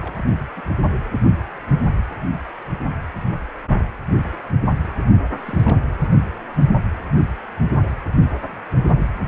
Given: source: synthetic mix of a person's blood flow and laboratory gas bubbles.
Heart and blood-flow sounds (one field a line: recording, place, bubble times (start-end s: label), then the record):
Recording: Doppler ultrasound of blood flow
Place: precordium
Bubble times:
0.01-0.25 s: bubbles
0.56-0.61 s: bubbles
5.36-5.80 s: bubbles
From the record:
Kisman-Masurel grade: 221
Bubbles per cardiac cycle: several, 3 to 8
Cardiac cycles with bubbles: 10 to 50%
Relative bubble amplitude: barely perceptible (0.100 to 0.250)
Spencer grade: 2 (many but less than half of the cardiac periods contain bubble signals, singularly or in groups)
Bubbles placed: only in the low amplitude regions of the cardiac cycle